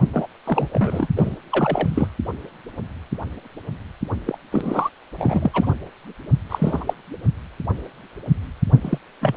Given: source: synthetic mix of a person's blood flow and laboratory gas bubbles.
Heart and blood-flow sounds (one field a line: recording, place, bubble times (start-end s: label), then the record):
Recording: Doppler ultrasound of blood flow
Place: precordium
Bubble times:
0.13-0.27 s: bubbles
0.46-0.69 s: bubbles
0.73-1.07 s: bubbles
1.17-1.35 s: bubbles
1.50-2.07 s: bubbles
4.26-4.38 s: bubbles
4.52-4.90 s: bubbles
5.18-5.73 s: bubbles
6.49-6.94 s: bubbles
8.81-8.98 s: bubbles
9.21-9.35 s: bubbles
From the record:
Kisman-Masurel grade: 232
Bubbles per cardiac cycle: several, 3 to 8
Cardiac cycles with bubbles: 50 to 99%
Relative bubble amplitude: moderate (0.250 to 0.450)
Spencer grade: 3 (all of the cardiac periods contain showers or single bubble signals, but not dominating or overriding the cardiac motion signals)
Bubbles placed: only in the low amplitude regions of the cardiac cycle